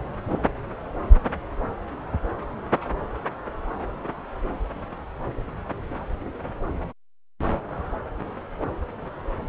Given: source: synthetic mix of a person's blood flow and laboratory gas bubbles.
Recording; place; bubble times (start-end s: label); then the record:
Doppler ultrasound of blood flow; subclavian vein
no bubbles
From the record:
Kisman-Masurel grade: 000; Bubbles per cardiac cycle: 0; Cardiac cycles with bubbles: 0%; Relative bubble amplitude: no bubbles discernible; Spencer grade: 0 (complete lack of bubble signals)